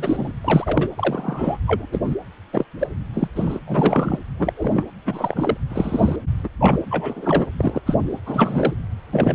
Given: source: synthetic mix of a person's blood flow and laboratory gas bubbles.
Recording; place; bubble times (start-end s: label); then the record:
Doppler ultrasound of blood flow; precordium
0.00-0.33 s: bubbles
0.45-0.90 s: bubbles
0.96-1.58 s: bubbles
1.66-1.86 s: bubbles
1.92-2.01 s: bubbles
2.06-2.15 s: bubbles
2.53-2.65 s: bubbles
2.79-2.88 s: bubbles
3.14-3.29 s: bubbles
3.35-3.59 s: bubbles
3.66-4.19 s: bubbles
4.38-4.53 s: bubbles
4.57-4.85 s: bubbles
5.05-5.57 s: bubbles
5.70-6.16 s: bubbles
6.44-6.48 s: bubbles
6.60-6.79 s: bubbles
6.91-7.46 s: bubbles
7.58-7.80 s: bubbles
7.86-7.95 s: bubbles
8.26-8.73 s: bubbles
9.12-9.34 s: bubbles
From the record:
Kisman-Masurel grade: 242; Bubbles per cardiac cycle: several, 3 to 8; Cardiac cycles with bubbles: 100%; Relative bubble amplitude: moderate (0.250 to 0.450); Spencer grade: 3 (all of the cardiac periods contain showers or single bubble signals, but not dominating or overriding the cardiac motion signals); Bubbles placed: anywhere in the cardiac cycle